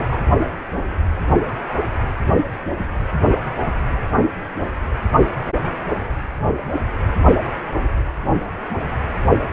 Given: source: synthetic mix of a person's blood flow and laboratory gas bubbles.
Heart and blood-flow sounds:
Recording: Doppler ultrasound of blood flow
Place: precordium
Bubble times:
0.00-0.07 s: bubbles
0.12-0.17 s: bubbles
From the record:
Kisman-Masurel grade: 213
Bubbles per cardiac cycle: several, 3 to 8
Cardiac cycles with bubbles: 1 to 10%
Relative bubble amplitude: loud (0.450 to 0.775)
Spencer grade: 1 (occasional bubble signal discernible with the cardiac motion signal, with majority of cardiac periods free of bubbles)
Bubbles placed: only in the low amplitude regions of the cardiac cycle

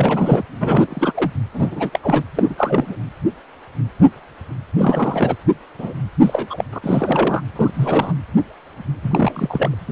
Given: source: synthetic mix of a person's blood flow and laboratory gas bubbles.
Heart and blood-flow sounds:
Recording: Doppler ultrasound of blood flow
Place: precordium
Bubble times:
0.00-0.43 s: bubbles
0.60-1.32 s: bubbles
1.53-1.99 s: bubbles
2.02-2.23 s: bubbles
2.35-2.55 s: bubbles
2.58-2.96 s: bubbles
4.78-5.35 s: bubbles
5.79-5.94 s: bubbles
6.21-6.64 s: bubbles
6.72-6.79 s: bubbles
6.82-7.42 s: bubbles
7.55-7.71 s: bubbles
7.75-8.13 s: bubbles
9.02-9.76 s: bubbles
From the record:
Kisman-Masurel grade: 332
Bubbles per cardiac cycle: rolling drumbeat, 9 or more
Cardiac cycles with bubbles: 50 to 99%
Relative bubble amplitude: moderate (0.250 to 0.450)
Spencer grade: 3 (all of the cardiac periods contain showers or single bubble signals, but not dominating or overriding the cardiac motion signals)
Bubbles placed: anywhere in the cardiac cycle

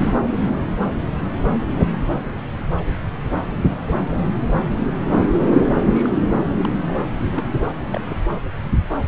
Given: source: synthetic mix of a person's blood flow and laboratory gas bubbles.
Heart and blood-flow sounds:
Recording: Doppler ultrasound of blood flow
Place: subclavian vein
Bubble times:
3.63-3.71 s: bubbles
3.85-4.03 s: bubbles
5.10-5.29 s: bubbles
5.93-6.11 s: bubbles
6.25-6.38 s: bubbles
6.62-6.68 s: bubbles
6.81-7.00 s: bubbles
7.32-7.43 s: bubbles
7.90-8.01 s: bubbles
8.06-8.17 s: bubbles
From the record:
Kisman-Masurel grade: 121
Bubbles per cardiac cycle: 1 to 2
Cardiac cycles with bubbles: 10 to 50%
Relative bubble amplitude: barely perceptible (0.100 to 0.250)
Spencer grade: 2 (many but less than half of the cardiac periods contain bubble signals, singularly or in groups)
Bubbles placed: anywhere in the cardiac cycle

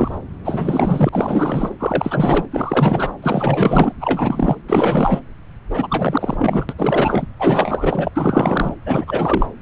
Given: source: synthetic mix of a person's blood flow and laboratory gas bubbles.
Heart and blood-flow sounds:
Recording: Doppler ultrasound of blood flow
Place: subclavian vein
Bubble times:
0.00-0.18 s: bubbles
0.45-1.09 s: bubbles
1.12-1.75 s: bubbles
1.79-2.46 s: bubbles
2.52-3.11 s: bubbles
3.22-3.92 s: bubbles
4.00-4.58 s: bubbles
4.69-5.20 s: bubbles
5.70-5.87 s: bubbles
5.90-6.66 s: bubbles
6.69-6.74 s: bubbles
6.78-7.26 s: bubbles
7.39-8.10 s: bubbles
8.14-8.74 s: bubbles
8.86-9.46 s: bubbles
From the record:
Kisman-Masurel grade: 444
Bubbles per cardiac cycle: continuous sound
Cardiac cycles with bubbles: 100%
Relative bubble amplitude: maximal (0.775 to 0.999)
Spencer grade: 4 (maximum detectable bubble signal sounding continuously throughout systole and diastole of every cardiac period, and overriding the amplitude of the normal cardiac signals)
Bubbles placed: anywhere in the cardiac cycle

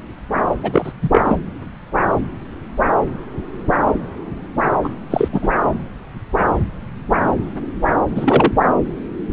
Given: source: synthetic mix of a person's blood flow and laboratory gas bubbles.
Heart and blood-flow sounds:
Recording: Doppler ultrasound of blood flow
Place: subclavian vein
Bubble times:
0.63-0.92 s: bubbles
1.01-1.21 s: bubbles
1.24-1.39 s: bubbles
4.83-4.88 s: bubbles
5.10-5.29 s: bubbles
5.32-5.48 s: bubbles
8.11-8.53 s: bubbles
From the record:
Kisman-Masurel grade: 223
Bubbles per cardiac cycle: several, 3 to 8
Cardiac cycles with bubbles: 10 to 50%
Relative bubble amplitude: loud (0.450 to 0.775)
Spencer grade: 2 (many but less than half of the cardiac periods contain bubble signals, singularly or in groups)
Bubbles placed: anywhere in the cardiac cycle

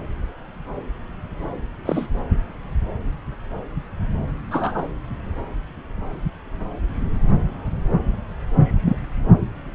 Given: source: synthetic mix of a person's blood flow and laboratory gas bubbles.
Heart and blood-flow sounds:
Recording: Doppler ultrasound of blood flow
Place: subclavian vein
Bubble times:
1.85-2.07 s: bubbles
4.50-4.88 s: bubbles
8.63-8.97 s: bubbles
From the record:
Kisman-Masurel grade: 122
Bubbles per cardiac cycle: 1 to 2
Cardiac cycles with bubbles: 10 to 50%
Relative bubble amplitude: moderate (0.250 to 0.450)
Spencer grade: 2 (many but less than half of the cardiac periods contain bubble signals, singularly or in groups)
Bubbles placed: anywhere in the cardiac cycle

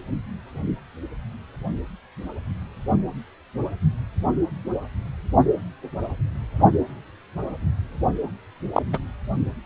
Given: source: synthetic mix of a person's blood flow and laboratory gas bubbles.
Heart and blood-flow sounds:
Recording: Doppler ultrasound of blood flow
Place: precordium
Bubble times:
8.75-8.83 s: bubbles
8.93-8.99 s: bubbles
From the record:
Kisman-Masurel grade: 112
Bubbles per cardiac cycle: 1 to 2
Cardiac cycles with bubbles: 1 to 10%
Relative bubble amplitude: moderate (0.250 to 0.450)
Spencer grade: 1 (occasional bubble signal discernible with the cardiac motion signal, with majority of cardiac periods free of bubbles)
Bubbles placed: only in the low amplitude regions of the cardiac cycle

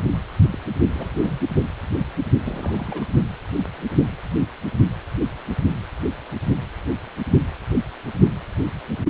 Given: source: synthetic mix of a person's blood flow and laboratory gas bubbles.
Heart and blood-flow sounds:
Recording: Doppler ultrasound of blood flow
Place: precordium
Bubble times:
0.50-0.58 s: bubbles
0.77-0.85 s: bubbles
0.94-1.10 s: bubbles
1.14-1.39 s: bubbles
2.45-3.06 s: bubbles
From the record:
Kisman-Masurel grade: 211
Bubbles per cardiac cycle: several, 3 to 8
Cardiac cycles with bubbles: 1 to 10%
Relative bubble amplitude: barely perceptible (0.100 to 0.250)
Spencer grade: 1 (occasional bubble signal discernible with the cardiac motion signal, with majority of cardiac periods free of bubbles)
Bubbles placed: only in the low amplitude regions of the cardiac cycle

